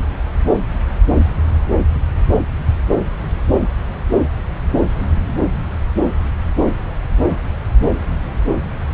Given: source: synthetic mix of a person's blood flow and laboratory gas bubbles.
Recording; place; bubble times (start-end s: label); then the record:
Doppler ultrasound of blood flow; subclavian vein
no bubbles
From the record:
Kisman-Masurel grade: 000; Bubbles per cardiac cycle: 0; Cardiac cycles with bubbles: 0%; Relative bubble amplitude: no bubbles discernible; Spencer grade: 0 (complete lack of bubble signals)